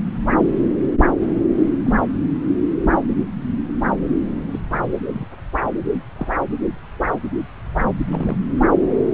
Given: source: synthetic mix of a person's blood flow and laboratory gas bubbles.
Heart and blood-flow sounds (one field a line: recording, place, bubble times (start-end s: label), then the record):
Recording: Doppler ultrasound of blood flow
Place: subclavian vein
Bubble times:
1.85-1.94 s: bubbles
4.51-4.60 s: bubbles
4.73-4.79 s: bubbles
5.13-5.27 s: bubbles
5.92-6.04 s: bubbles
6.16-6.33 s: bubbles
8.08-8.38 s: bubbles
From the record:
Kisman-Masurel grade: 121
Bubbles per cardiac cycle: 1 to 2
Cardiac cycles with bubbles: 10 to 50%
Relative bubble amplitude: barely perceptible (0.100 to 0.250)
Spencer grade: 2 (many but less than half of the cardiac periods contain bubble signals, singularly or in groups)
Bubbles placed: anywhere in the cardiac cycle